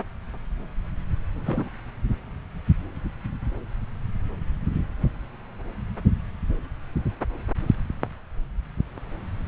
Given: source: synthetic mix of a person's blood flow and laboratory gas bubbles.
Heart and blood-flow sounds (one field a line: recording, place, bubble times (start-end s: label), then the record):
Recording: Doppler ultrasound of blood flow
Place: subclavian vein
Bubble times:
1.46-1.69 s: bubbles
From the record:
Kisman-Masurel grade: 211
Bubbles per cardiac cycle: several, 3 to 8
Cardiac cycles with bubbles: 1 to 10%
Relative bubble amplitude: barely perceptible (0.100 to 0.250)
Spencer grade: 1 (occasional bubble signal discernible with the cardiac motion signal, with majority of cardiac periods free of bubbles)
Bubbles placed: anywhere in the cardiac cycle